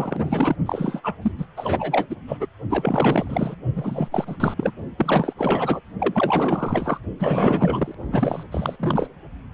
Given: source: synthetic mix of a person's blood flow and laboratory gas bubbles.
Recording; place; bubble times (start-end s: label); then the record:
Doppler ultrasound of blood flow; precordium
0.00-0.56 s: bubbles
0.65-1.16 s: bubbles
1.22-1.32 s: bubbles
1.39-1.46 s: bubbles
1.56-2.16 s: bubbles
2.27-2.38 s: bubbles
2.40-2.47 s: bubbles
2.69-3.55 s: bubbles
3.76-4.37 s: bubbles
4.39-4.54 s: bubbles
4.56-4.71 s: bubbles
4.97-5.33 s: bubbles
5.37-5.80 s: bubbles
5.99-6.99 s: bubbles
7.19-7.95 s: bubbles
8.12-8.44 s: bubbles
8.51-8.77 s: bubbles
8.79-9.07 s: bubbles
From the record:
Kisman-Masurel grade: 444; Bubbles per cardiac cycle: continuous sound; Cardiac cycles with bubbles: 100%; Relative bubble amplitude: maximal (0.775 to 0.999); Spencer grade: 4 (maximum detectable bubble signal sounding continuously throughout systole and diastole of every cardiac period, and overriding the amplitude of the normal cardiac signals); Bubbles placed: only in the low amplitude regions of the cardiac cycle